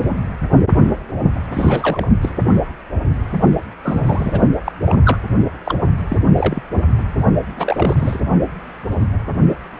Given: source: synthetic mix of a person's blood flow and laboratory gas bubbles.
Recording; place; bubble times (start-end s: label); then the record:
Doppler ultrasound of blood flow; precordium
1.52-2.06 s: bubbles
2.21-2.29 s: bubbles
3.80-4.39 s: bubbles
4.64-4.72 s: bubbles
4.85-4.99 s: bubbles
5.04-5.18 s: bubbles
5.65-5.78 s: bubbles
6.09-6.17 s: bubbles
6.37-6.62 s: bubbles
7.56-8.21 s: bubbles
From the record:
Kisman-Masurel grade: 232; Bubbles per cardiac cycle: several, 3 to 8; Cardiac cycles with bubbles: 50 to 99%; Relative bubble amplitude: moderate (0.250 to 0.450); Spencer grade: 3 (all of the cardiac periods contain showers or single bubble signals, but not dominating or overriding the cardiac motion signals); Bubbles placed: only in the low amplitude regions of the cardiac cycle